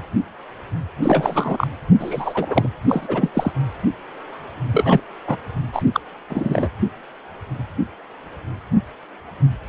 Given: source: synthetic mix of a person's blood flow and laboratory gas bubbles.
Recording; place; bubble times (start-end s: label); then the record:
Doppler ultrasound of blood flow; precordium
1.02-1.68 s: bubbles
1.99-2.69 s: bubbles
2.88-3.31 s: bubbles
3.35-3.52 s: bubbles
4.71-5.01 s: bubbles
5.26-5.36 s: bubbles
5.72-5.82 s: bubbles
5.93-6.00 s: bubbles
6.29-6.69 s: bubbles
From the record:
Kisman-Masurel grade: 223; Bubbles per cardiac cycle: several, 3 to 8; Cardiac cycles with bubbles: 10 to 50%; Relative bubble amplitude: loud (0.450 to 0.775); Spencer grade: 2 (many but less than half of the cardiac periods contain bubble signals, singularly or in groups); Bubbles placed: anywhere in the cardiac cycle